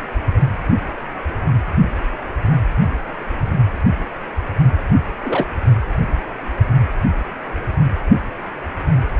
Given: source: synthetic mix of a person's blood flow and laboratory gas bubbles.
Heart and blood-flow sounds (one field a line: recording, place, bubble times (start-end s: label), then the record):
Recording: Doppler ultrasound of blood flow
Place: precordium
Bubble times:
5.23-5.47 s: bubbles
From the record:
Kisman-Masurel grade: 112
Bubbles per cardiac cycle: 1 to 2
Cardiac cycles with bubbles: 1 to 10%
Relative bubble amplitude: moderate (0.250 to 0.450)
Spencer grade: 1 (occasional bubble signal discernible with the cardiac motion signal, with majority of cardiac periods free of bubbles)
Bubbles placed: only in the low amplitude regions of the cardiac cycle